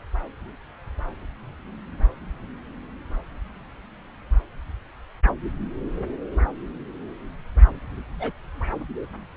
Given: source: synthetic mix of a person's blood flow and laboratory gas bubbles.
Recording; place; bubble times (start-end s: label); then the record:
Doppler ultrasound of blood flow; subclavian vein
8.20-8.31 s: bubbles
From the record:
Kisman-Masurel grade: 122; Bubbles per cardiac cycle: 1 to 2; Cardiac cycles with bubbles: 10 to 50%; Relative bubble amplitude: moderate (0.250 to 0.450); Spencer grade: 2 (many but less than half of the cardiac periods contain bubble signals, singularly or in groups); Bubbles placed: anywhere in the cardiac cycle